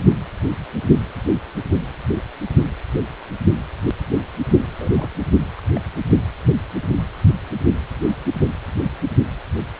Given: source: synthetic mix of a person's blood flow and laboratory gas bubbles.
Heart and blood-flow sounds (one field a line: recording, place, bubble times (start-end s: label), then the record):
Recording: Doppler ultrasound of blood flow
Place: precordium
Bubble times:
4.76-4.92 s: bubbles
4.97-5.08 s: bubbles
5.57-5.61 s: bubbles
5.75-5.81 s: bubbles
From the record:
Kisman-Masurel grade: 211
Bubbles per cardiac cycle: several, 3 to 8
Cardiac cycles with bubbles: 1 to 10%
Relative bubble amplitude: barely perceptible (0.100 to 0.250)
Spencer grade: 1 (occasional bubble signal discernible with the cardiac motion signal, with majority of cardiac periods free of bubbles)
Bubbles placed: only in the low amplitude regions of the cardiac cycle